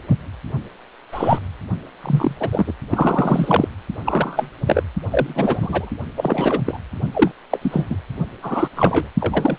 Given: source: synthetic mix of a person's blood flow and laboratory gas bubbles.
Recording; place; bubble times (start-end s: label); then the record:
Doppler ultrasound of blood flow; precordium
0.07-0.17 s: bubbles
1.11-1.40 s: bubbles
1.99-2.37 s: bubbles
2.40-2.73 s: bubbles
2.90-3.68 s: bubbles
4.05-4.52 s: bubbles
4.66-4.82 s: bubbles
5.11-5.90 s: bubbles
6.17-6.62 s: bubbles
6.66-6.80 s: bubbles
7.13-7.32 s: bubbles
7.51-7.87 s: bubbles
7.90-7.97 s: bubbles
8.42-8.69 s: bubbles
8.75-9.08 s: bubbles
9.20-9.57 s: bubbles
From the record:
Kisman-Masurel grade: 243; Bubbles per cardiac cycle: several, 3 to 8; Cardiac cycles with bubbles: 100%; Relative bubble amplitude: loud (0.450 to 0.775); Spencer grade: 3 (all of the cardiac periods contain showers or single bubble signals, but not dominating or overriding the cardiac motion signals); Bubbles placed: only in the low amplitude regions of the cardiac cycle